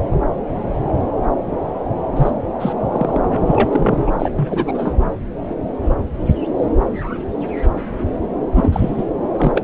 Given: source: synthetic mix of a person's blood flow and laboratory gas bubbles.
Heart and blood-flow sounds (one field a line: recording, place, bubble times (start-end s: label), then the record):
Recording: Doppler ultrasound of blood flow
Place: subclavian vein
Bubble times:
2.17-2.30 s: bubbles
2.60-2.73 s: bubbles
2.82-3.19 s: bubbles
3.22-4.04 s: bubbles
4.06-4.12 s: bubbles
4.19-4.30 s: bubbles
4.36-4.93 s: bubbles
8.54-9.04 s: bubbles
9.37-9.62 s: bubbles
From the record:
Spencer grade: 2 (many but less than half of the cardiac periods contain bubble signals, singularly or in groups)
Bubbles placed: anywhere in the cardiac cycle